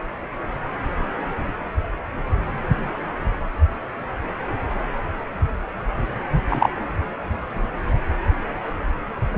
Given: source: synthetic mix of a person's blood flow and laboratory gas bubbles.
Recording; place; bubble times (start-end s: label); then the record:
Doppler ultrasound of blood flow; precordium
6.49-6.68 s: bubbles
From the record:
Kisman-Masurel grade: 113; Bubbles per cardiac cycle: 1 to 2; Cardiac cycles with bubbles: 1 to 10%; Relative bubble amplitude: loud (0.450 to 0.775); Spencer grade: 1 (occasional bubble signal discernible with the cardiac motion signal, with majority of cardiac periods free of bubbles); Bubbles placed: anywhere in the cardiac cycle